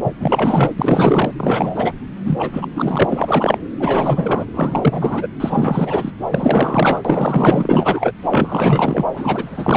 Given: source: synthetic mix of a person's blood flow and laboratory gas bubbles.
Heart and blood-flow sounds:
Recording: Doppler ultrasound of blood flow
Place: subclavian vein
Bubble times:
0.04-0.13 s: bubbles
0.20-0.71 s: bubbles
0.76-1.32 s: bubbles
1.37-1.94 s: bubbles
2.24-2.67 s: bubbles
2.74-3.58 s: bubbles
3.80-4.46 s: bubbles
4.54-5.29 s: bubbles
5.40-6.12 s: bubbles
6.30-7.02 s: bubbles
7.04-8.12 s: bubbles
8.30-9.05 s: bubbles
9.14-9.77 s: bubbles
From the record:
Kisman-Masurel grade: 444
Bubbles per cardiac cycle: continuous sound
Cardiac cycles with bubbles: 100%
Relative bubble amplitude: maximal (0.775 to 0.999)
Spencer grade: 4 (maximum detectable bubble signal sounding continuously throughout systole and diastole of every cardiac period, and overriding the amplitude of the normal cardiac signals)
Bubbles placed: anywhere in the cardiac cycle

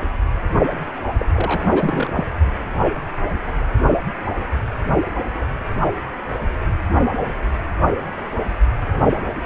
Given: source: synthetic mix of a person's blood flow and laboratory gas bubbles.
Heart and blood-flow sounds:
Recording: Doppler ultrasound of blood flow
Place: precordium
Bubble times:
1.18-1.26 s: bubbles
1.33-2.25 s: bubbles
From the record:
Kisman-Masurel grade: 212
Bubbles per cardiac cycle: several, 3 to 8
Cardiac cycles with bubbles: 1 to 10%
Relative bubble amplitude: moderate (0.250 to 0.450)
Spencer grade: 1 (occasional bubble signal discernible with the cardiac motion signal, with majority of cardiac periods free of bubbles)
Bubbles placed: only in the low amplitude regions of the cardiac cycle

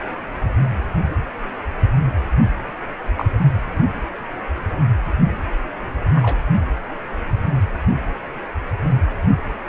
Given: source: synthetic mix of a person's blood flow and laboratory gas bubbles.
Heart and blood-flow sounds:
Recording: Doppler ultrasound of blood flow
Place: precordium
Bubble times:
3.17-3.25 s: bubbles
6.15-6.36 s: bubbles
From the record:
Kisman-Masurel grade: 122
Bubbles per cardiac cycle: 1 to 2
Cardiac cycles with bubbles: 10 to 50%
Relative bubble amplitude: moderate (0.250 to 0.450)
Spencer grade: 2 (many but less than half of the cardiac periods contain bubble signals, singularly or in groups)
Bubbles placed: anywhere in the cardiac cycle

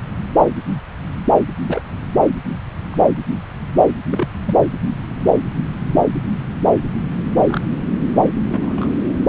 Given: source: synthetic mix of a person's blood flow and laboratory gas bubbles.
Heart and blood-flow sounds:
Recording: Doppler ultrasound of blood flow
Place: subclavian vein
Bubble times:
1.68-1.82 s: bubbles
2.91-3.04 s: bubbles
4.10-4.27 s: bubbles
4.46-4.54 s: bubbles
7.48-7.61 s: bubbles
8.48-8.90 s: bubbles
From the record:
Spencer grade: 2 (many but less than half of the cardiac periods contain bubble signals, singularly or in groups)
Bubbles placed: anywhere in the cardiac cycle

